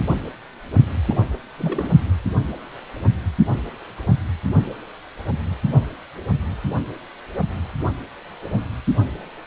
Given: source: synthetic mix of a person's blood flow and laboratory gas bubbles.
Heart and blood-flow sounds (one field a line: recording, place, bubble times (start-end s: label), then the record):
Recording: Doppler ultrasound of blood flow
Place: precordium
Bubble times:
1.09-1.36 s: bubbles
1.58-2.00 s: bubbles
From the record:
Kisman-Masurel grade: 211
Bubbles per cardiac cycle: several, 3 to 8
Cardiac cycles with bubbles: 1 to 10%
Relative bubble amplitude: barely perceptible (0.100 to 0.250)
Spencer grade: 1 (occasional bubble signal discernible with the cardiac motion signal, with majority of cardiac periods free of bubbles)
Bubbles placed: only in the low amplitude regions of the cardiac cycle